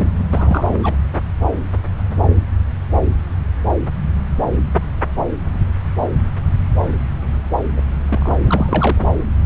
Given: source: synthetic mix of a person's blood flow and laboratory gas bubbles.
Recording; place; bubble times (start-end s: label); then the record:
Doppler ultrasound of blood flow; subclavian vein
0.00-0.08 s: bubbles
0.32-0.70 s: bubbles
0.72-0.96 s: bubbles
7.76-7.81 s: bubbles
8.09-8.38 s: bubbles
8.44-9.04 s: bubbles
From the record:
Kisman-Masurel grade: 222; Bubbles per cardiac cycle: several, 3 to 8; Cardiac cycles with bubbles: 10 to 50%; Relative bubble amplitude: moderate (0.250 to 0.450); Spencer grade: 2 (many but less than half of the cardiac periods contain bubble signals, singularly or in groups); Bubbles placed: anywhere in the cardiac cycle